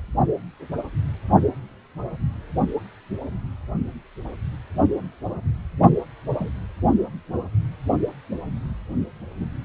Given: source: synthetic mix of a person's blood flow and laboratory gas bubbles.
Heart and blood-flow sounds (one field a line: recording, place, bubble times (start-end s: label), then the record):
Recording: Doppler ultrasound of blood flow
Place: precordium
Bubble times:
6.33-6.50 s: bubbles
From the record:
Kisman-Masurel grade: 111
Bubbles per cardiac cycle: 1 to 2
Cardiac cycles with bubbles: 1 to 10%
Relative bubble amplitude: barely perceptible (0.100 to 0.250)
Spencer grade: 1 (occasional bubble signal discernible with the cardiac motion signal, with majority of cardiac periods free of bubbles)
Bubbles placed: only in the low amplitude regions of the cardiac cycle